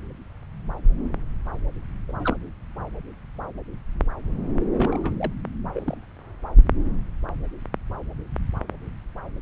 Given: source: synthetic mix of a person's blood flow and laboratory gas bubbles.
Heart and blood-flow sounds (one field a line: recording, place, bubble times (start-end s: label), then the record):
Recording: Doppler ultrasound of blood flow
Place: subclavian vein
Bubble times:
2.08-2.12 s: bubbles
2.19-2.36 s: bubbles
4.74-5.33 s: bubbles
5.71-5.97 s: bubbles
From the record:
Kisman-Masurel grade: 221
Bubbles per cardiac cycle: several, 3 to 8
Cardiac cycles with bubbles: 10 to 50%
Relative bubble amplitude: barely perceptible (0.100 to 0.250)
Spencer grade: 2 (many but less than half of the cardiac periods contain bubble signals, singularly or in groups)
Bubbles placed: anywhere in the cardiac cycle